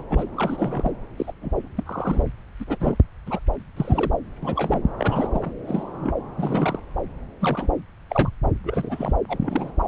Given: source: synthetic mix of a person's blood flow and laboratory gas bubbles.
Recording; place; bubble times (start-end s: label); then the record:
Doppler ultrasound of blood flow; subclavian vein
0.00-0.03 s: bubbles
0.10-0.27 s: bubbles
0.36-0.93 s: bubbles
1.17-1.32 s: bubbles
1.42-1.68 s: bubbles
1.76-2.24 s: bubbles
2.60-2.64 s: bubbles
2.67-2.97 s: bubbles
3.26-3.40 s: bubbles
3.76-4.12 s: bubbles
4.42-4.83 s: bubbles
4.99-5.52 s: bubbles
5.67-6.13 s: bubbles
6.37-6.79 s: bubbles
7.40-7.72 s: bubbles
8.10-8.30 s: bubbles
8.63-9.13 s: bubbles
9.29-9.71 s: bubbles
From the record:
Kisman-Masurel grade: 242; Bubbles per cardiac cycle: several, 3 to 8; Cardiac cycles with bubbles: 100%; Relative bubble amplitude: moderate (0.250 to 0.450); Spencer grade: 3 (all of the cardiac periods contain showers or single bubble signals, but not dominating or overriding the cardiac motion signals); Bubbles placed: anywhere in the cardiac cycle